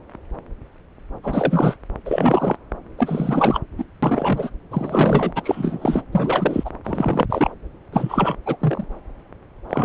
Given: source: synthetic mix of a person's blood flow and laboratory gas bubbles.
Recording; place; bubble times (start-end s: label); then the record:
Doppler ultrasound of blood flow; subclavian vein
1.23-1.77 s: bubbles
2.05-2.57 s: bubbles
2.98-3.60 s: bubbles
3.77-3.84 s: bubbles
4.02-4.50 s: bubbles
4.71-5.32 s: bubbles
5.35-6.02 s: bubbles
6.12-6.70 s: bubbles
6.84-7.25 s: bubbles
7.29-7.50 s: bubbles
7.92-8.36 s: bubbles
8.46-8.57 s: bubbles
8.60-8.85 s: bubbles
9.69-9.85 s: bubbles
From the record:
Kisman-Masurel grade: 333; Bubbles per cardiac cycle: rolling drumbeat, 9 or more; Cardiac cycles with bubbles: 50 to 99%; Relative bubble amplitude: loud (0.450 to 0.775); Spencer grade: 3 (all of the cardiac periods contain showers or single bubble signals, but not dominating or overriding the cardiac motion signals); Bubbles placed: anywhere in the cardiac cycle